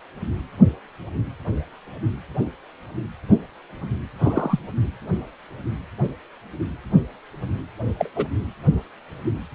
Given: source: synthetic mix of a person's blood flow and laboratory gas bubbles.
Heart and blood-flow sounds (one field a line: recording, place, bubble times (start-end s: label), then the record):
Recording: Doppler ultrasound of blood flow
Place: precordium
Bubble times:
4.19-4.59 s: bubbles
7.99-8.10 s: bubbles
8.16-8.27 s: bubbles
From the record:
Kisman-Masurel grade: 112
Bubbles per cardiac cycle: 1 to 2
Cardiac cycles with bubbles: 1 to 10%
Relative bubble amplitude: moderate (0.250 to 0.450)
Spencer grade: 1 (occasional bubble signal discernible with the cardiac motion signal, with majority of cardiac periods free of bubbles)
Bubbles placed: anywhere in the cardiac cycle